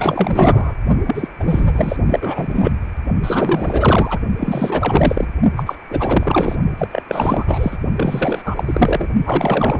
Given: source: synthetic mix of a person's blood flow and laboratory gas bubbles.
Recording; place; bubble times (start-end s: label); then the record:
Doppler ultrasound of blood flow; precordium
0.00-0.74 s: bubbles
1.06-1.28 s: bubbles
1.40-1.97 s: bubbles
2.06-2.72 s: bubbles
3.21-4.19 s: bubbles
4.37-5.27 s: bubbles
5.56-5.63 s: bubbles
5.66-5.75 s: bubbles
5.90-6.56 s: bubbles
6.77-6.88 s: bubbles
6.92-7.02 s: bubbles
7.08-7.77 s: bubbles
7.96-8.42 s: bubbles
8.45-9.08 s: bubbles
9.25-9.80 s: bubbles
From the record:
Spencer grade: 4 (maximum detectable bubble signal sounding continuously throughout systole and diastole of every cardiac period, and overriding the amplitude of the normal cardiac signals); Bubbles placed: only in the low amplitude regions of the cardiac cycle